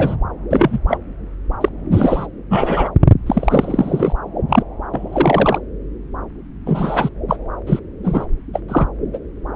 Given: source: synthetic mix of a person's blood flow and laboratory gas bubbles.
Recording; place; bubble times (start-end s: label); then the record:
Doppler ultrasound of blood flow; subclavian vein
0.00-0.16 s: bubbles
0.51-0.79 s: bubbles
0.88-0.97 s: bubbles
1.60-1.69 s: bubbles
1.91-2.27 s: bubbles
2.50-2.89 s: bubbles
3.26-4.13 s: bubbles
4.48-4.62 s: bubbles
4.94-5.59 s: bubbles
6.66-7.09 s: bubbles
7.28-7.38 s: bubbles
7.67-7.80 s: bubbles
8.04-8.25 s: bubbles
8.53-8.61 s: bubbles
8.68-8.87 s: bubbles
9.13-9.19 s: bubbles
From the record:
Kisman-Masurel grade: 233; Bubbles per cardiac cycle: several, 3 to 8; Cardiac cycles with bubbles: 50 to 99%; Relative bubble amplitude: loud (0.450 to 0.775); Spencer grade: 3 (all of the cardiac periods contain showers or single bubble signals, but not dominating or overriding the cardiac motion signals); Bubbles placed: anywhere in the cardiac cycle